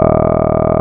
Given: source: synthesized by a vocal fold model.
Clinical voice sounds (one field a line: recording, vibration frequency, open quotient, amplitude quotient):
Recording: sustained vowel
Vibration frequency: 40 Hz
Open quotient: 0.2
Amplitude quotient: 1.3